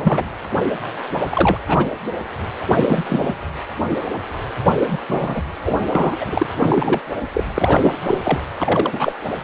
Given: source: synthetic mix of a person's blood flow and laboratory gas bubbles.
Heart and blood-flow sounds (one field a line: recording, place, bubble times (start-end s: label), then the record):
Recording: Doppler ultrasound of blood flow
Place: precordium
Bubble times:
0.00-0.28 s: bubbles
1.29-1.58 s: bubbles
1.67-1.94 s: bubbles
2.61-2.67 s: bubbles
2.73-3.05 s: bubbles
3.08-3.35 s: bubbles
3.90-3.96 s: bubbles
4.75-4.98 s: bubbles
5.08-5.42 s: bubbles
5.65-5.81 s: bubbles
5.92-6.17 s: bubbles
6.20-6.46 s: bubbles
6.59-7.01 s: bubbles
7.33-7.44 s: bubbles
7.54-7.96 s: bubbles
8.06-8.19 s: bubbles
8.23-8.40 s: bubbles
8.55-9.13 s: bubbles
From the record:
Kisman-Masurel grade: 243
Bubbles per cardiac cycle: several, 3 to 8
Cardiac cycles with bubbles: 100%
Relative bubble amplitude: loud (0.450 to 0.775)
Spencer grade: 3 (all of the cardiac periods contain showers or single bubble signals, but not dominating or overriding the cardiac motion signals)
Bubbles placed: anywhere in the cardiac cycle